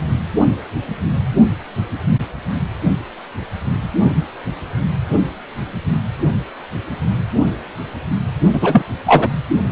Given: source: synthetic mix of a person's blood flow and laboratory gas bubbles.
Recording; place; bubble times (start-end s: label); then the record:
Doppler ultrasound of blood flow; precordium
8.53-8.82 s: bubbles
9.06-9.29 s: bubbles
From the record:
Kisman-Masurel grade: 213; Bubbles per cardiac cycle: several, 3 to 8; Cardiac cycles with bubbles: 1 to 10%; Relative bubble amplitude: loud (0.450 to 0.775); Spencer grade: 1 (occasional bubble signal discernible with the cardiac motion signal, with majority of cardiac periods free of bubbles); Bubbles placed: only in the low amplitude regions of the cardiac cycle